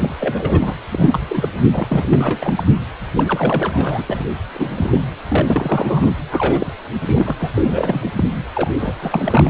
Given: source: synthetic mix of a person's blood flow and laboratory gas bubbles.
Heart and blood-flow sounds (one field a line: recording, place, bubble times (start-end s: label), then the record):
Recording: Doppler ultrasound of blood flow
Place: precordium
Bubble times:
0.00-0.15 s: bubbles
0.19-0.75 s: bubbles
0.90-1.23 s: bubbles
1.29-1.49 s: bubbles
1.71-2.64 s: bubbles
3.16-4.24 s: bubbles
4.54-5.01 s: bubbles
5.29-6.11 s: bubbles
6.32-6.72 s: bubbles
7.03-7.34 s: bubbles
7.40-8.12 s: bubbles
8.16-8.24 s: bubbles
8.54-8.71 s: bubbles
8.78-9.50 s: bubbles
From the record:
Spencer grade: 3 (all of the cardiac periods contain showers or single bubble signals, but not dominating or overriding the cardiac motion signals)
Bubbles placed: anywhere in the cardiac cycle